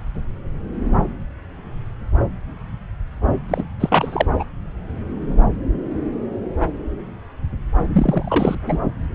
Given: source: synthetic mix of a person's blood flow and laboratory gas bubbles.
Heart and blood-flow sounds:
Doppler ultrasound of blood flow; subclavian vein
3.48-3.65 s: bubbles
3.80-4.27 s: bubbles
4.39-4.44 s: bubbles
7.93-8.55 s: bubbles
8.67-8.79 s: bubbles
From the record:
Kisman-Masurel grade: 223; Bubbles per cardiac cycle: several, 3 to 8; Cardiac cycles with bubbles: 10 to 50%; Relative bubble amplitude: loud (0.450 to 0.775); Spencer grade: 2 (many but less than half of the cardiac periods contain bubble signals, singularly or in groups); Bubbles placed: anywhere in the cardiac cycle

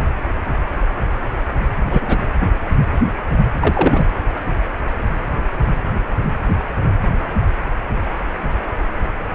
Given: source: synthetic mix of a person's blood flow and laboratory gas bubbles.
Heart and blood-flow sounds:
Doppler ultrasound of blood flow; precordium
1.90-2.19 s: bubbles
3.60-4.08 s: bubbles
From the record:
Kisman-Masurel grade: 212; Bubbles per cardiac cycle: several, 3 to 8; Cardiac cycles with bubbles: 1 to 10%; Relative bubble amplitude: moderate (0.250 to 0.450); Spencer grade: 1 (occasional bubble signal discernible with the cardiac motion signal, with majority of cardiac periods free of bubbles); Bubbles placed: anywhere in the cardiac cycle

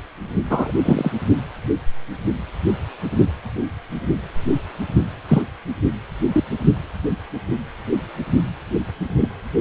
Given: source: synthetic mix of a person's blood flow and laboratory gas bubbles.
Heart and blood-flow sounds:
Doppler ultrasound of blood flow; precordium
0.49-0.72 s: bubbles
0.84-1.11 s: bubbles
5.29-5.42 s: bubbles
6.32-6.44 s: bubbles
9.20-9.29 s: bubbles
From the record:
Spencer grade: 2 (many but less than half of the cardiac periods contain bubble signals, singularly or in groups); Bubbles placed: only in the low amplitude regions of the cardiac cycle

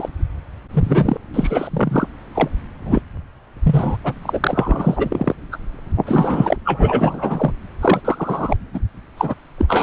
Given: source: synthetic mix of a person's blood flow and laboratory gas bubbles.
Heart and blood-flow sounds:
Doppler ultrasound of blood flow; subclavian vein
0.00-0.09 s: bubbles
0.73-1.17 s: bubbles
1.34-2.07 s: bubbles
2.35-2.48 s: bubbles
2.84-3.02 s: bubbles
3.63-3.96 s: bubbles
4.04-4.13 s: bubbles
4.22-4.39 s: bubbles
4.43-5.35 s: bubbles
5.51-5.58 s: bubbles
6.06-6.56 s: bubbles
6.64-7.52 s: bubbles
7.81-8.02 s: bubbles
8.04-8.56 s: bubbles
8.73-8.79 s: bubbles
9.17-9.35 s: bubbles
9.58-9.83 s: bubbles
From the record:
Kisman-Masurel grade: 343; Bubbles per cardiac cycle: rolling drumbeat, 9 or more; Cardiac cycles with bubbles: 100%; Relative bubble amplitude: loud (0.450 to 0.775); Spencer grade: 3 (all of the cardiac periods contain showers or single bubble signals, but not dominating or overriding the cardiac motion signals); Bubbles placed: anywhere in the cardiac cycle

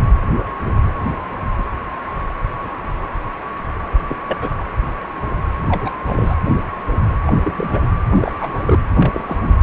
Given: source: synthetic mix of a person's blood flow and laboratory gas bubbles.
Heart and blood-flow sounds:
Doppler ultrasound of blood flow; precordium
4.07-4.17 s: bubbles
4.27-4.38 s: bubbles
4.40-4.50 s: bubbles
5.68-5.91 s: bubbles
6.04-6.35 s: bubbles
7.25-7.33 s: bubbles
7.40-7.94 s: bubbles
8.12-8.79 s: bubbles
8.97-9.36 s: bubbles
9.41-9.53 s: bubbles
From the record:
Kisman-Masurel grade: 222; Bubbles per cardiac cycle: several, 3 to 8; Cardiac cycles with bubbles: 10 to 50%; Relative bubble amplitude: moderate (0.250 to 0.450); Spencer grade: 2 (many but less than half of the cardiac periods contain bubble signals, singularly or in groups); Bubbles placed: anywhere in the cardiac cycle

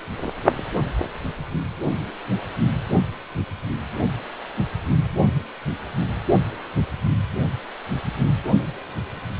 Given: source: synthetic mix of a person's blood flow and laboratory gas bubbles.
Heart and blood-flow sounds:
Doppler ultrasound of blood flow; precordium
no bubbles
From the record:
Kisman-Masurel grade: 000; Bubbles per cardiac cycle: 0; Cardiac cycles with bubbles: 0%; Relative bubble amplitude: no bubbles discernible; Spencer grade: 0 (complete lack of bubble signals)

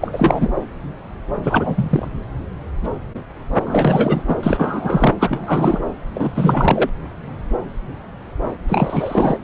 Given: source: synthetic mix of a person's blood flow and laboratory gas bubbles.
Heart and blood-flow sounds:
Doppler ultrasound of blood flow; subclavian vein
0.01-0.51 s: bubbles
1.43-2.08 s: bubbles
3.66-4.22 s: bubbles
4.28-4.36 s: bubbles
4.43-5.13 s: bubbles
5.20-5.80 s: bubbles
6.13-6.32 s: bubbles
6.35-6.89 s: bubbles
8.68-9.38 s: bubbles
From the record:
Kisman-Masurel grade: 333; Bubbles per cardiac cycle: rolling drumbeat, 9 or more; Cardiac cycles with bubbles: 50 to 99%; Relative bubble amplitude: loud (0.450 to 0.775); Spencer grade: 3 (all of the cardiac periods contain showers or single bubble signals, but not dominating or overriding the cardiac motion signals); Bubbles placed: anywhere in the cardiac cycle

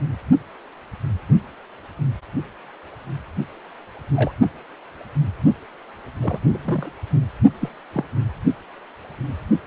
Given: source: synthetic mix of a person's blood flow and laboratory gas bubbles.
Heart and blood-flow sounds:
Doppler ultrasound of blood flow; precordium
4.14-4.32 s: bubbles
6.21-6.46 s: bubbles
6.48-6.92 s: bubbles
7.60-7.69 s: bubbles
7.94-8.05 s: bubbles
From the record:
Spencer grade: 2 (many but less than half of the cardiac periods contain bubble signals, singularly or in groups); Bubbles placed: only in the low amplitude regions of the cardiac cycle

